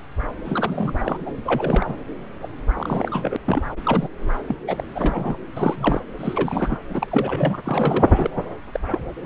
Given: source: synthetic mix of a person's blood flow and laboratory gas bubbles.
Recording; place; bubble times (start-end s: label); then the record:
Doppler ultrasound of blood flow; subclavian vein
0.45-0.92 s: bubbles
1.00-1.17 s: bubbles
1.26-1.32 s: bubbles
1.45-1.96 s: bubbles
2.42-2.48 s: bubbles
2.77-3.37 s: bubbles
3.46-3.63 s: bubbles
3.85-4.09 s: bubbles
4.48-4.56 s: bubbles
4.67-5.37 s: bubbles
5.56-6.00 s: bubbles
6.19-6.78 s: bubbles
6.89-7.07 s: bubbles
7.10-7.58 s: bubbles
7.66-8.30 s: bubbles
8.71-8.79 s: bubbles
8.86-8.99 s: bubbles
9.24-9.26 s: bubbles
From the record:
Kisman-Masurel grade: 342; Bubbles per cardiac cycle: rolling drumbeat, 9 or more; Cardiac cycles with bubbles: 100%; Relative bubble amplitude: moderate (0.250 to 0.450); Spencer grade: 3 (all of the cardiac periods contain showers or single bubble signals, but not dominating or overriding the cardiac motion signals); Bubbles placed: anywhere in the cardiac cycle